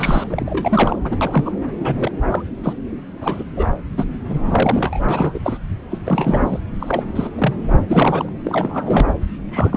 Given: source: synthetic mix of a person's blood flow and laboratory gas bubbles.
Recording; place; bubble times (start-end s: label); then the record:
Doppler ultrasound of blood flow; subclavian vein
0.00-0.24 s: bubbles
0.30-0.96 s: bubbles
1.04-1.17 s: bubbles
1.21-1.53 s: bubbles
1.79-2.12 s: bubbles
2.30-2.42 s: bubbles
2.63-2.73 s: bubbles
3.21-3.44 s: bubbles
3.56-3.69 s: bubbles
3.97-4.09 s: bubbles
4.28-5.00 s: bubbles
5.08-5.38 s: bubbles
5.42-5.57 s: bubbles
5.90-5.98 s: bubbles
6.06-6.58 s: bubbles
6.80-7.02 s: bubbles
7.15-7.30 s: bubbles
7.38-7.53 s: bubbles
7.68-7.83 s: bubbles
7.89-8.29 s: bubbles
8.45-9.06 s: bubbles
9.51-9.76 s: bubbles
From the record:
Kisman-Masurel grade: 242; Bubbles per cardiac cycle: several, 3 to 8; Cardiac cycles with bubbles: 100%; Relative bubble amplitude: moderate (0.250 to 0.450); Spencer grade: 3 (all of the cardiac periods contain showers or single bubble signals, but not dominating or overriding the cardiac motion signals); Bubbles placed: anywhere in the cardiac cycle